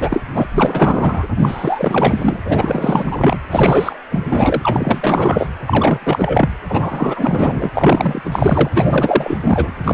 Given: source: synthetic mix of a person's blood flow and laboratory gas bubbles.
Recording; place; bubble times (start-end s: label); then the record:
Doppler ultrasound of blood flow; precordium
0.00-0.22 s: bubbles
0.33-0.47 s: bubbles
0.51-1.25 s: bubbles
1.36-2.38 s: bubbles
2.44-3.38 s: bubbles
3.50-3.98 s: bubbles
4.11-4.25 s: bubbles
4.29-5.48 s: bubbles
5.66-6.49 s: bubbles
6.68-7.69 s: bubbles
7.74-8.70 s: bubbles
8.74-9.73 s: bubbles
9.84-9.94 s: bubbles
From the record:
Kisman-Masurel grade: 444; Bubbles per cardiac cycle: continuous sound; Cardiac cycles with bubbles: 100%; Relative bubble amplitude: maximal (0.775 to 0.999); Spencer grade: 4 (maximum detectable bubble signal sounding continuously throughout systole and diastole of every cardiac period, and overriding the amplitude of the normal cardiac signals); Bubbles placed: anywhere in the cardiac cycle